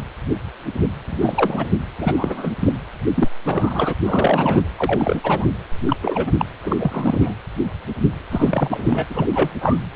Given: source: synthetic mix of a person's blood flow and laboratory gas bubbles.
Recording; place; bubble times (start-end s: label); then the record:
Doppler ultrasound of blood flow; precordium
1.09-1.67 s: bubbles
1.98-2.13 s: bubbles
2.17-2.52 s: bubbles
2.59-2.73 s: bubbles
3.14-3.29 s: bubbles
3.45-3.93 s: bubbles
4.00-4.61 s: bubbles
4.77-5.48 s: bubbles
5.88-5.96 s: bubbles
6.02-6.32 s: bubbles
6.38-6.45 s: bubbles
6.63-7.35 s: bubbles
8.31-9.05 s: bubbles
9.10-9.29 s: bubbles
9.33-9.50 s: bubbles
9.61-9.77 s: bubbles
9.94-9.96 s: bubbles
From the record:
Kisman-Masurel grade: 333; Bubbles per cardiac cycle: rolling drumbeat, 9 or more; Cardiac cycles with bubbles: 50 to 99%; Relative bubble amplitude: loud (0.450 to 0.775); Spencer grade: 3 (all of the cardiac periods contain showers or single bubble signals, but not dominating or overriding the cardiac motion signals); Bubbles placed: anywhere in the cardiac cycle